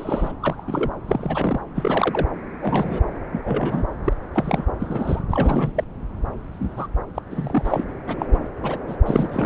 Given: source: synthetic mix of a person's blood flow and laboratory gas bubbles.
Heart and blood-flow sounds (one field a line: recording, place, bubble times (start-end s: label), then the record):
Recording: Doppler ultrasound of blood flow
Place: subclavian vein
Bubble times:
0.00-0.32 s: bubbles
0.40-0.55 s: bubbles
0.58-0.63 s: bubbles
0.67-0.91 s: bubbles
1.07-1.60 s: bubbles
1.75-2.27 s: bubbles
2.58-3.00 s: bubbles
3.32-3.40 s: bubbles
3.44-3.84 s: bubbles
4.04-4.13 s: bubbles
4.34-4.66 s: bubbles
4.79-5.21 s: bubbles
5.29-5.84 s: bubbles
6.53-6.87 s: bubbles
7.14-7.19 s: bubbles
7.31-7.84 s: bubbles
8.07-8.16 s: bubbles
8.19-8.26 s: bubbles
8.31-8.38 s: bubbles
8.62-8.78 s: bubbles
8.87-8.96 s: bubbles
9.05-9.46 s: bubbles
From the record:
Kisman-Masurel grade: 242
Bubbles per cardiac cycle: several, 3 to 8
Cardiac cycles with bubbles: 100%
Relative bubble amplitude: moderate (0.250 to 0.450)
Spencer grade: 3 (all of the cardiac periods contain showers or single bubble signals, but not dominating or overriding the cardiac motion signals)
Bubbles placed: anywhere in the cardiac cycle